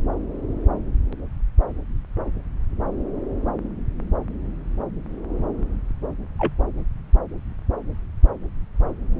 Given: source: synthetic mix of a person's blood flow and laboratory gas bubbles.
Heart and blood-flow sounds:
Doppler ultrasound of blood flow; subclavian vein
6.38-6.53 s: bubbles
From the record:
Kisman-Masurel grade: 112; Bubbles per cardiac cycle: 1 to 2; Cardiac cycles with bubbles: 1 to 10%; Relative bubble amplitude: moderate (0.250 to 0.450); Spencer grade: 1 (occasional bubble signal discernible with the cardiac motion signal, with majority of cardiac periods free of bubbles); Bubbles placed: anywhere in the cardiac cycle

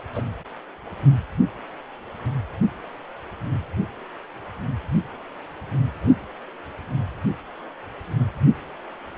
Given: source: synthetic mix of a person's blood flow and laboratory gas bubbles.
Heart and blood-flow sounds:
Doppler ultrasound of blood flow; precordium
0.14-0.21 s: bubbles
From the record:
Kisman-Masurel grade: 212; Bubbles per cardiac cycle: several, 3 to 8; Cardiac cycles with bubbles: 1 to 10%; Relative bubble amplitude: moderate (0.250 to 0.450); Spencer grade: 1 (occasional bubble signal discernible with the cardiac motion signal, with majority of cardiac periods free of bubbles); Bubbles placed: anywhere in the cardiac cycle

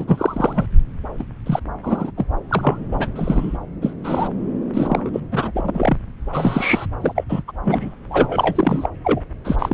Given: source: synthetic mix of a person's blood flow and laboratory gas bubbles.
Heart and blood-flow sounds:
Doppler ultrasound of blood flow; subclavian vein
0.00-0.05 s: bubbles
0.07-0.66 s: bubbles
1.18-1.25 s: bubbles
1.45-1.59 s: bubbles
1.82-2.10 s: bubbles
2.17-2.25 s: bubbles
2.49-2.79 s: bubbles
2.91-3.07 s: bubbles
3.15-3.57 s: bubbles
3.81-3.93 s: bubbles
4.04-4.29 s: bubbles
4.74-5.10 s: bubbles
5.13-5.21 s: bubbles
5.31-5.98 s: bubbles
6.33-6.86 s: bubbles
7.01-7.24 s: bubbles
7.29-7.42 s: bubbles
7.47-7.51 s: bubbles
7.64-7.96 s: bubbles
8.10-8.90 s: bubbles
9.04-9.21 s: bubbles
9.45-9.55 s: bubbles
9.58-9.74 s: bubbles
From the record:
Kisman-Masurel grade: 332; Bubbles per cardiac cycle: rolling drumbeat, 9 or more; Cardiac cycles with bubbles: 50 to 99%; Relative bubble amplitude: moderate (0.250 to 0.450); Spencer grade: 3 (all of the cardiac periods contain showers or single bubble signals, but not dominating or overriding the cardiac motion signals); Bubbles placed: anywhere in the cardiac cycle

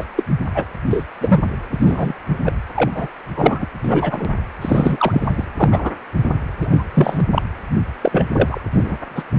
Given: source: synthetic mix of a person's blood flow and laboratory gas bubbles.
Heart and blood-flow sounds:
Doppler ultrasound of blood flow; precordium
0.00-0.06 s: bubbles
0.15-0.24 s: bubbles
0.54-0.65 s: bubbles
0.90-1.04 s: bubbles
1.21-1.42 s: bubbles
1.71-2.15 s: bubbles
2.45-2.53 s: bubbles
2.75-2.91 s: bubbles
2.94-3.08 s: bubbles
3.37-3.66 s: bubbles
3.83-4.26 s: bubbles
4.61-5.45 s: bubbles
5.56-5.91 s: bubbles
6.23-6.29 s: bubbles
6.61-6.84 s: bubbles
6.93-7.23 s: bubbles
7.31-7.42 s: bubbles
8.01-8.26 s: bubbles
8.32-8.59 s: bubbles
8.72-8.98 s: bubbles
9.15-9.23 s: bubbles
From the record:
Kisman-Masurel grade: 243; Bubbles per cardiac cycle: several, 3 to 8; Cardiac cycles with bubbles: 100%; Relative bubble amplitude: loud (0.450 to 0.775); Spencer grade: 3 (all of the cardiac periods contain showers or single bubble signals, but not dominating or overriding the cardiac motion signals); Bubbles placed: anywhere in the cardiac cycle

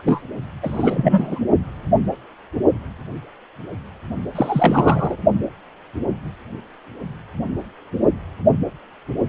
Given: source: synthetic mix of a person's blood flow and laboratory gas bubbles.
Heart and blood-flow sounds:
Doppler ultrasound of blood flow; precordium
0.05-0.22 s: bubbles
0.62-1.39 s: bubbles
4.35-5.16 s: bubbles
From the record:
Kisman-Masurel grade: 233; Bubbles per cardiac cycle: several, 3 to 8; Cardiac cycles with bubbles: 50 to 99%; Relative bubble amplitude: loud (0.450 to 0.775); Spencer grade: 3 (all of the cardiac periods contain showers or single bubble signals, but not dominating or overriding the cardiac motion signals); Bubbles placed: only in the low amplitude regions of the cardiac cycle

